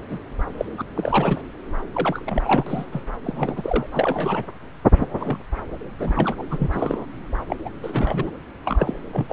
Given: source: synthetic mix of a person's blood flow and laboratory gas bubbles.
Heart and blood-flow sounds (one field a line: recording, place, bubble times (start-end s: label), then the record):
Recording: Doppler ultrasound of blood flow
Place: subclavian vein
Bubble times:
0.09-0.20 s: bubbles
0.57-0.65 s: bubbles
0.74-0.82 s: bubbles
0.95-1.41 s: bubbles
1.93-2.86 s: bubbles
2.92-3.04 s: bubbles
3.23-3.87 s: bubbles
3.92-4.46 s: bubbles
4.99-5.08 s: bubbles
5.20-5.37 s: bubbles
6.00-6.43 s: bubbles
6.50-6.70 s: bubbles
6.72-7.06 s: bubbles
7.48-7.56 s: bubbles
7.65-7.69 s: bubbles
7.82-8.30 s: bubbles
8.64-8.95 s: bubbles
9.12-9.27 s: bubbles
9.29-9.33 s: bubbles
From the record:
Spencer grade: 3 (all of the cardiac periods contain showers or single bubble signals, but not dominating or overriding the cardiac motion signals)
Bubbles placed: anywhere in the cardiac cycle